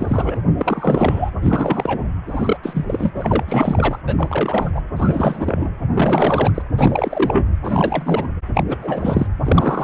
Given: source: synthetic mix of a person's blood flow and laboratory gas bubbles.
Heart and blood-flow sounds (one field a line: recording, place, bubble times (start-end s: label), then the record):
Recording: Doppler ultrasound of blood flow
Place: precordium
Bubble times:
0.00-0.38 s: bubbles
0.59-1.31 s: bubbles
1.42-2.04 s: bubbles
2.27-2.57 s: bubbles
2.63-3.12 s: bubbles
3.15-3.99 s: bubbles
4.06-4.71 s: bubbles
4.75-4.81 s: bubbles
4.96-5.70 s: bubbles
5.93-6.62 s: bubbles
6.78-7.47 s: bubbles
7.64-8.27 s: bubbles
8.54-8.64 s: bubbles
8.69-8.77 s: bubbles
8.80-9.27 s: bubbles
9.45-9.84 s: bubbles
From the record:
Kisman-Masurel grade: 343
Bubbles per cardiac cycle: rolling drumbeat, 9 or more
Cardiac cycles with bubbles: 100%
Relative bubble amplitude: loud (0.450 to 0.775)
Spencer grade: 3 (all of the cardiac periods contain showers or single bubble signals, but not dominating or overriding the cardiac motion signals)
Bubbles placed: anywhere in the cardiac cycle